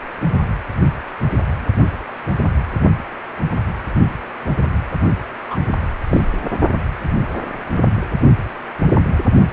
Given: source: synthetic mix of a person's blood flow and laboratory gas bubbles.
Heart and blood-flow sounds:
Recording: Doppler ultrasound of blood flow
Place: precordium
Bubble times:
5.50-5.57 s: bubbles
6.09-6.21 s: bubbles
From the record:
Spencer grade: 1 (occasional bubble signal discernible with the cardiac motion signal, with majority of cardiac periods free of bubbles)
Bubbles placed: only in the low amplitude regions of the cardiac cycle

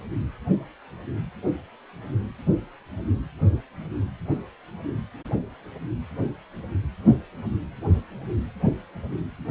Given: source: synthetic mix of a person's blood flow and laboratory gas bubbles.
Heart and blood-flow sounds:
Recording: Doppler ultrasound of blood flow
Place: precordium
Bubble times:
no bubbles
From the record:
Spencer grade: 0 (complete lack of bubble signals)

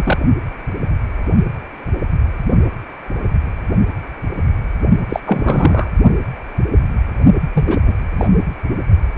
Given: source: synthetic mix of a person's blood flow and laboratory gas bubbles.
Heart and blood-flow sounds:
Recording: Doppler ultrasound of blood flow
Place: precordium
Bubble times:
0.00-0.18 s: bubbles
5.08-5.20 s: bubbles
5.26-5.89 s: bubbles
7.53-7.77 s: bubbles
7.86-7.93 s: bubbles
8.19-8.28 s: bubbles
From the record:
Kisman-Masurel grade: 223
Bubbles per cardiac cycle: several, 3 to 8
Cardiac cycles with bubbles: 10 to 50%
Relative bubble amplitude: loud (0.450 to 0.775)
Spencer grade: 2 (many but less than half of the cardiac periods contain bubble signals, singularly or in groups)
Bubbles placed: only in the low amplitude regions of the cardiac cycle

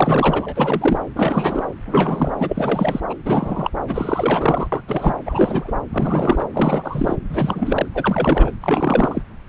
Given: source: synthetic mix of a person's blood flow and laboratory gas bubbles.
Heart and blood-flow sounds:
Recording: Doppler ultrasound of blood flow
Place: subclavian vein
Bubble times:
0.00-0.99 s: bubbles
1.16-1.65 s: bubbles
1.86-2.31 s: bubbles
2.39-3.00 s: bubbles
3.10-3.14 s: bubbles
3.25-3.70 s: bubbles
3.87-4.68 s: bubbles
4.72-4.81 s: bubbles
4.88-5.16 s: bubbles
5.25-5.71 s: bubbles
5.91-6.46 s: bubbles
6.53-7.15 s: bubbles
7.29-7.86 s: bubbles
7.94-8.51 s: bubbles
8.62-9.22 s: bubbles
From the record:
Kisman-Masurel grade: 342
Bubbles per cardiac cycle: rolling drumbeat, 9 or more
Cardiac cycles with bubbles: 100%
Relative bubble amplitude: moderate (0.250 to 0.450)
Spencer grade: 3 (all of the cardiac periods contain showers or single bubble signals, but not dominating or overriding the cardiac motion signals)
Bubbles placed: anywhere in the cardiac cycle

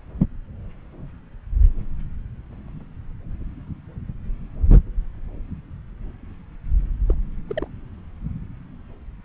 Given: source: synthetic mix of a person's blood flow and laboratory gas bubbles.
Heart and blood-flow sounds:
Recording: Doppler ultrasound of blood flow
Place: subclavian vein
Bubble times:
7.09-7.15 s: bubbles
7.47-7.67 s: bubbles
From the record:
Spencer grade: 1 (occasional bubble signal discernible with the cardiac motion signal, with majority of cardiac periods free of bubbles)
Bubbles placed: anywhere in the cardiac cycle

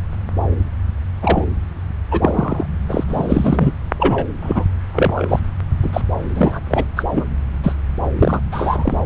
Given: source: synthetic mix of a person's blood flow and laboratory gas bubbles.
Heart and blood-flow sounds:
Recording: Doppler ultrasound of blood flow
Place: subclavian vein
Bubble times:
1.22-1.46 s: bubbles
2.10-2.67 s: bubbles
2.88-3.03 s: bubbles
3.08-3.71 s: bubbles
3.99-4.26 s: bubbles
4.42-4.65 s: bubbles
4.93-5.40 s: bubbles
5.83-5.90 s: bubbles
5.93-6.02 s: bubbles
6.35-6.60 s: bubbles
6.70-6.84 s: bubbles
6.96-7.04 s: bubbles
7.11-7.27 s: bubbles
7.63-7.74 s: bubbles
8.18-8.40 s: bubbles
8.51-8.99 s: bubbles
From the record:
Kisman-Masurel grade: 233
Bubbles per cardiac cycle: several, 3 to 8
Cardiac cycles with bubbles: 50 to 99%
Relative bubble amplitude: loud (0.450 to 0.775)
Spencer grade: 3 (all of the cardiac periods contain showers or single bubble signals, but not dominating or overriding the cardiac motion signals)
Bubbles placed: anywhere in the cardiac cycle

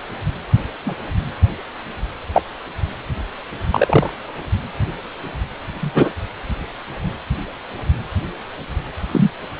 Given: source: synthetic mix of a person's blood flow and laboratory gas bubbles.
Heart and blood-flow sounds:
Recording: Doppler ultrasound of blood flow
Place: precordium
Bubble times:
0.85-0.96 s: bubbles
2.33-2.43 s: bubbles
3.71-4.13 s: bubbles
5.80-6.11 s: bubbles
9.12-9.30 s: bubbles
From the record:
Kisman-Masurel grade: 123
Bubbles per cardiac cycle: 1 to 2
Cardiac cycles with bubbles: 10 to 50%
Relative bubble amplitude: loud (0.450 to 0.775)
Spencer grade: 2 (many but less than half of the cardiac periods contain bubble signals, singularly or in groups)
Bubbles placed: anywhere in the cardiac cycle

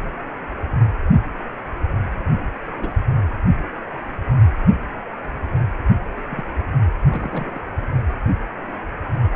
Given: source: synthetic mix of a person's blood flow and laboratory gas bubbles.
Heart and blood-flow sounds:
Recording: Doppler ultrasound of blood flow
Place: precordium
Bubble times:
2.77-3.00 s: bubbles
6.30-6.43 s: bubbles
7.09-7.59 s: bubbles
From the record:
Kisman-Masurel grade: 121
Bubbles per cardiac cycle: 1 to 2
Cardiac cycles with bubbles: 10 to 50%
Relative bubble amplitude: barely perceptible (0.100 to 0.250)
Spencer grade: 2 (many but less than half of the cardiac periods contain bubble signals, singularly or in groups)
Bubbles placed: only in the low amplitude regions of the cardiac cycle

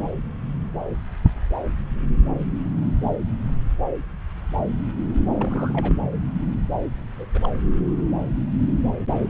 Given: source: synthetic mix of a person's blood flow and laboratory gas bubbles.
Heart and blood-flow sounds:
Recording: Doppler ultrasound of blood flow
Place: subclavian vein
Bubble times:
5.32-5.94 s: bubbles
7.16-7.26 s: bubbles
7.34-7.50 s: bubbles
From the record:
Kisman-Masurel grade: 222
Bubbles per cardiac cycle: several, 3 to 8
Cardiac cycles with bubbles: 10 to 50%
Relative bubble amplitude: moderate (0.250 to 0.450)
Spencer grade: 2 (many but less than half of the cardiac periods contain bubble signals, singularly or in groups)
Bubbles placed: anywhere in the cardiac cycle

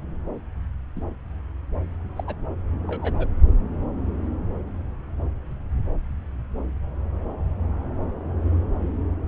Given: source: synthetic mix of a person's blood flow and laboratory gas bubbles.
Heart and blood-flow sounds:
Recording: Doppler ultrasound of blood flow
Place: subclavian vein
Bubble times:
0.95-1.01 s: bubbles
2.16-2.24 s: bubbles
2.26-2.35 s: bubbles
2.87-3.28 s: bubbles
From the record:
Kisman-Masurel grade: 122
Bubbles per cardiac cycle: 1 to 2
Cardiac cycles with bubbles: 10 to 50%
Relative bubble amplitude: moderate (0.250 to 0.450)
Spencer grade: 2 (many but less than half of the cardiac periods contain bubble signals, singularly or in groups)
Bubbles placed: anywhere in the cardiac cycle

